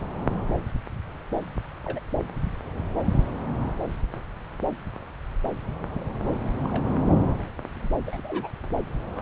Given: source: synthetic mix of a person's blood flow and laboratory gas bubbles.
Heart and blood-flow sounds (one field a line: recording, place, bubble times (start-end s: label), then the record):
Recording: Doppler ultrasound of blood flow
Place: subclavian vein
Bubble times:
1.85-2.00 s: bubbles
5.94-6.06 s: bubbles
6.64-6.84 s: bubbles
7.38-7.43 s: bubbles
7.73-7.88 s: bubbles
8.07-8.50 s: bubbles
From the record:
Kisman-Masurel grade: 121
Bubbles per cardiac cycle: 1 to 2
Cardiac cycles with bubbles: 10 to 50%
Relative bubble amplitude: barely perceptible (0.100 to 0.250)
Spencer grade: 2 (many but less than half of the cardiac periods contain bubble signals, singularly or in groups)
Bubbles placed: anywhere in the cardiac cycle